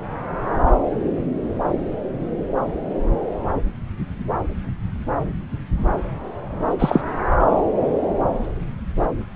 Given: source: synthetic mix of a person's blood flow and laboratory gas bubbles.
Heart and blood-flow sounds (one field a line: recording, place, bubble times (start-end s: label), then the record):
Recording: Doppler ultrasound of blood flow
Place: subclavian vein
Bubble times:
6.79-7.04 s: bubbles
From the record:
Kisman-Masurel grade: 213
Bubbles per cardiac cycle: several, 3 to 8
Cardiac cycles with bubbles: 1 to 10%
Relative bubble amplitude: loud (0.450 to 0.775)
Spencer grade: 1 (occasional bubble signal discernible with the cardiac motion signal, with majority of cardiac periods free of bubbles)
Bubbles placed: anywhere in the cardiac cycle